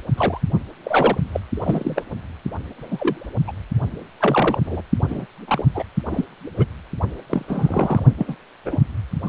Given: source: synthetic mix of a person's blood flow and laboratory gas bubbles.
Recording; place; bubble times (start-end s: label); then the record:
Doppler ultrasound of blood flow; precordium
0.17-0.39 s: bubbles
0.84-1.18 s: bubbles
1.31-1.40 s: bubbles
1.54-2.02 s: bubbles
2.90-3.28 s: bubbles
3.47-3.52 s: bubbles
4.20-4.59 s: bubbles
4.65-4.81 s: bubbles
5.08-5.26 s: bubbles
5.47-5.65 s: bubbles
5.74-5.84 s: bubbles
6.06-6.24 s: bubbles
6.57-6.65 s: bubbles
7.29-7.45 s: bubbles
7.47-8.03 s: bubbles
8.17-8.36 s: bubbles
8.65-8.77 s: bubbles
9.25-9.29 s: bubbles
From the record:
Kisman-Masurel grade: 232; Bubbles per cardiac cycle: several, 3 to 8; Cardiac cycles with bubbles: 50 to 99%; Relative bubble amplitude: moderate (0.250 to 0.450); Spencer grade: 3 (all of the cardiac periods contain showers or single bubble signals, but not dominating or overriding the cardiac motion signals); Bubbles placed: only in the low amplitude regions of the cardiac cycle